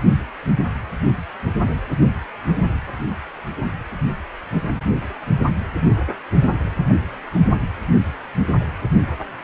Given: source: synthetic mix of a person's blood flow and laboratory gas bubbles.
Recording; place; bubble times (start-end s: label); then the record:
Doppler ultrasound of blood flow; precordium
no bubbles
From the record:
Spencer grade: 0 (complete lack of bubble signals)